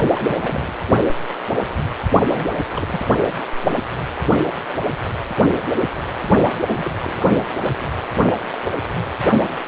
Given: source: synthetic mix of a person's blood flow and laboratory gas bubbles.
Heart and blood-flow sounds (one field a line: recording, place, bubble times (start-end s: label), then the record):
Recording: Doppler ultrasound of blood flow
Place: precordium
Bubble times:
0.15-0.79 s: bubbles
2.29-2.54 s: bubbles
2.58-2.69 s: bubbles
2.74-2.99 s: bubbles
6.52-6.58 s: bubbles
6.68-6.92 s: bubbles
7.00-7.32 s: bubbles
7.60-7.95 s: bubbles
From the record:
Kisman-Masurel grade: 221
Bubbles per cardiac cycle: several, 3 to 8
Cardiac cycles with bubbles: 10 to 50%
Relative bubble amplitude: barely perceptible (0.100 to 0.250)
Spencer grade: 2 (many but less than half of the cardiac periods contain bubble signals, singularly or in groups)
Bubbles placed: only in the low amplitude regions of the cardiac cycle